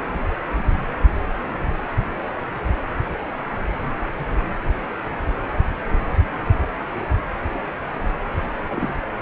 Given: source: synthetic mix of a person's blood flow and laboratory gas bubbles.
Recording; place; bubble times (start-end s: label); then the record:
Doppler ultrasound of blood flow; precordium
8.69-8.93 s: bubbles
From the record:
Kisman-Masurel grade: 111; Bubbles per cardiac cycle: 1 to 2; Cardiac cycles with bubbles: 1 to 10%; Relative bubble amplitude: barely perceptible (0.100 to 0.250); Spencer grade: 1 (occasional bubble signal discernible with the cardiac motion signal, with majority of cardiac periods free of bubbles); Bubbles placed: anywhere in the cardiac cycle